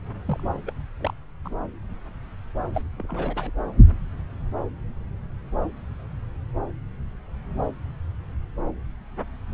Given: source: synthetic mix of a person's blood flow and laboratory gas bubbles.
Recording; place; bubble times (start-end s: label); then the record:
Doppler ultrasound of blood flow; subclavian vein
0.26-0.43 s: bubbles
0.67-0.73 s: bubbles
1.00-1.14 s: bubbles
1.44-1.56 s: bubbles
2.73-2.81 s: bubbles
2.97-3.50 s: bubbles
From the record:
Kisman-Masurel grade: 221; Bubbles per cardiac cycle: several, 3 to 8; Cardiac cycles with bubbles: 10 to 50%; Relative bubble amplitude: barely perceptible (0.100 to 0.250); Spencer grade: 2 (many but less than half of the cardiac periods contain bubble signals, singularly or in groups); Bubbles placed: anywhere in the cardiac cycle